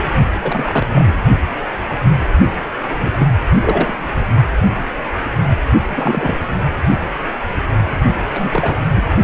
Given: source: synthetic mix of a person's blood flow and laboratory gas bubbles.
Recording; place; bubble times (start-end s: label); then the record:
Doppler ultrasound of blood flow; precordium
0.42-0.86 s: bubbles
0.95-1.14 s: bubbles
2.98-3.27 s: bubbles
3.61-3.96 s: bubbles
5.88-6.37 s: bubbles
8.34-8.76 s: bubbles
8.96-9.05 s: bubbles
From the record:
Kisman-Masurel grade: 232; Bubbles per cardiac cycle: several, 3 to 8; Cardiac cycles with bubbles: 50 to 99%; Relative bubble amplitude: moderate (0.250 to 0.450); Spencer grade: 3 (all of the cardiac periods contain showers or single bubble signals, but not dominating or overriding the cardiac motion signals); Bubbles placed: only in the low amplitude regions of the cardiac cycle